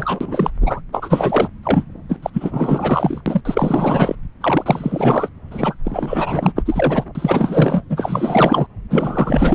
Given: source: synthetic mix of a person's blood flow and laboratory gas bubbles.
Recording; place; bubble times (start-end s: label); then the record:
Doppler ultrasound of blood flow; subclavian vein
0.00-0.51 s: bubbles
0.60-0.80 s: bubbles
0.93-1.48 s: bubbles
1.63-1.83 s: bubbles
2.09-2.19 s: bubbles
2.22-2.30 s: bubbles
2.33-3.21 s: bubbles
3.26-3.42 s: bubbles
3.45-4.16 s: bubbles
4.41-5.29 s: bubbles
5.50-5.75 s: bubbles
5.84-6.52 s: bubbles
6.55-7.04 s: bubbles
7.15-7.83 s: bubbles
7.89-8.67 s: bubbles
8.90-9.55 s: bubbles
From the record:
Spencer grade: 4 (maximum detectable bubble signal sounding continuously throughout systole and diastole of every cardiac period, and overriding the amplitude of the normal cardiac signals); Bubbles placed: anywhere in the cardiac cycle